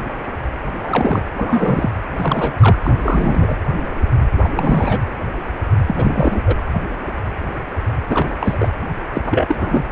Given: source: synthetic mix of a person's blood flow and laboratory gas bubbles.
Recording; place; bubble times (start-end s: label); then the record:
Doppler ultrasound of blood flow; precordium
0.83-1.21 s: bubbles
1.36-1.91 s: bubbles
2.17-2.52 s: bubbles
2.60-2.79 s: bubbles
2.83-3.56 s: bubbles
4.44-4.49 s: bubbles
4.55-4.99 s: bubbles
5.87-6.42 s: bubbles
6.46-6.56 s: bubbles
8.07-8.36 s: bubbles
8.41-8.69 s: bubbles
9.14-9.22 s: bubbles
9.24-9.56 s: bubbles
9.60-9.84 s: bubbles
From the record:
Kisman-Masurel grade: 332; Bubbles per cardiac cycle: rolling drumbeat, 9 or more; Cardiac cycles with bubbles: 50 to 99%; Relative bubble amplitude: moderate (0.250 to 0.450); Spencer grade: 3 (all of the cardiac periods contain showers or single bubble signals, but not dominating or overriding the cardiac motion signals); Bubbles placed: anywhere in the cardiac cycle